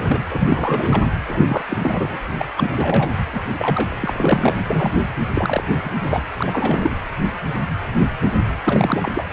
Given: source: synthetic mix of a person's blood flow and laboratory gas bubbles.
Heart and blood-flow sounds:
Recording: Doppler ultrasound of blood flow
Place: precordium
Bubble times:
0.00-0.23 s: bubbles
0.30-1.03 s: bubbles
1.28-1.64 s: bubbles
1.69-1.77 s: bubbles
1.82-2.19 s: bubbles
2.38-2.45 s: bubbles
2.56-3.23 s: bubbles
3.32-3.40 s: bubbles
3.57-3.96 s: bubbles
4.00-4.58 s: bubbles
4.68-5.06 s: bubbles
5.33-5.64 s: bubbles
5.70-5.93 s: bubbles
6.02-6.23 s: bubbles
6.37-6.96 s: bubbles
8.64-9.24 s: bubbles
9.29-9.33 s: bubbles
From the record:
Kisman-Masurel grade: 332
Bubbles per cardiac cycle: rolling drumbeat, 9 or more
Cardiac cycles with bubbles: 50 to 99%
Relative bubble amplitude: moderate (0.250 to 0.450)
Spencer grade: 3 (all of the cardiac periods contain showers or single bubble signals, but not dominating or overriding the cardiac motion signals)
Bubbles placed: anywhere in the cardiac cycle

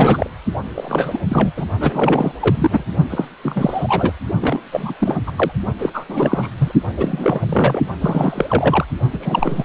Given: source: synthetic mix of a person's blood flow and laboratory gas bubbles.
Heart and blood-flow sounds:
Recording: Doppler ultrasound of blood flow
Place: precordium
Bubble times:
0.00-0.30 s: bubbles
0.74-1.20 s: bubbles
1.28-1.52 s: bubbles
1.56-1.65 s: bubbles
1.80-2.32 s: bubbles
2.40-2.84 s: bubbles
3.10-3.25 s: bubbles
3.43-4.13 s: bubbles
4.41-4.59 s: bubbles
4.71-4.93 s: bubbles
5.00-5.17 s: bubbles
5.26-5.31 s: bubbles
5.36-5.51 s: bubbles
5.79-5.90 s: bubbles
5.93-6.04 s: bubbles
6.08-6.48 s: bubbles
6.58-6.71 s: bubbles
6.97-7.81 s: bubbles
8.01-8.85 s: bubbles
9.13-9.19 s: bubbles
9.21-9.65 s: bubbles
From the record:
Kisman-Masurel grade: 343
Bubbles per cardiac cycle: rolling drumbeat, 9 or more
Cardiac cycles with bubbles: 100%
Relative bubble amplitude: loud (0.450 to 0.775)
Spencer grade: 3 (all of the cardiac periods contain showers or single bubble signals, but not dominating or overriding the cardiac motion signals)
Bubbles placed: only in the low amplitude regions of the cardiac cycle

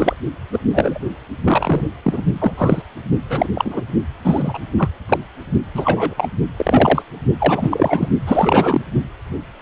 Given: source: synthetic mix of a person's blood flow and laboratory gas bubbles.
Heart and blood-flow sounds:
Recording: Doppler ultrasound of blood flow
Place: precordium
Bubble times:
0.00-0.14 s: bubbles
0.52-0.59 s: bubbles
0.68-0.98 s: bubbles
1.44-1.81 s: bubbles
2.02-2.21 s: bubbles
2.39-2.82 s: bubbles
3.29-3.48 s: bubbles
3.54-3.81 s: bubbles
4.24-4.60 s: bubbles
4.77-4.89 s: bubbles
5.09-5.19 s: bubbles
5.75-6.14 s: bubbles
6.17-6.28 s: bubbles
6.57-7.02 s: bubbles
7.39-8.09 s: bubbles
8.27-8.82 s: bubbles
From the record:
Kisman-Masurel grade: 233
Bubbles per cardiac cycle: several, 3 to 8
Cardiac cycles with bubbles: 50 to 99%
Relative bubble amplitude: loud (0.450 to 0.775)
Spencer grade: 3 (all of the cardiac periods contain showers or single bubble signals, but not dominating or overriding the cardiac motion signals)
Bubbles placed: only in the low amplitude regions of the cardiac cycle

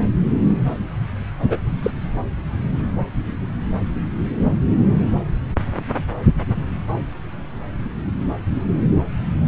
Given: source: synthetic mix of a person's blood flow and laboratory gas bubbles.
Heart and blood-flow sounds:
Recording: Doppler ultrasound of blood flow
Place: subclavian vein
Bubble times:
1.48-1.58 s: bubbles
1.83-1.91 s: bubbles
From the record:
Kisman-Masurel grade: 122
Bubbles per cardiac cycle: 1 to 2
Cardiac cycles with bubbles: 10 to 50%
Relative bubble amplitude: moderate (0.250 to 0.450)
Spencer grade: 2 (many but less than half of the cardiac periods contain bubble signals, singularly or in groups)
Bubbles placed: anywhere in the cardiac cycle

